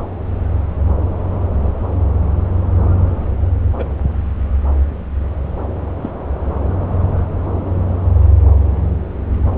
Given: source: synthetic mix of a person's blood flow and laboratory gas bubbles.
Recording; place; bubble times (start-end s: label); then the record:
Doppler ultrasound of blood flow; subclavian vein
3.76-3.91 s: bubbles
6.01-6.09 s: bubbles
From the record:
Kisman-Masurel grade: 112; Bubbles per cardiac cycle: 1 to 2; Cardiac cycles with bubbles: 1 to 10%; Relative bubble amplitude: moderate (0.250 to 0.450); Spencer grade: 1 (occasional bubble signal discernible with the cardiac motion signal, with majority of cardiac periods free of bubbles); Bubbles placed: anywhere in the cardiac cycle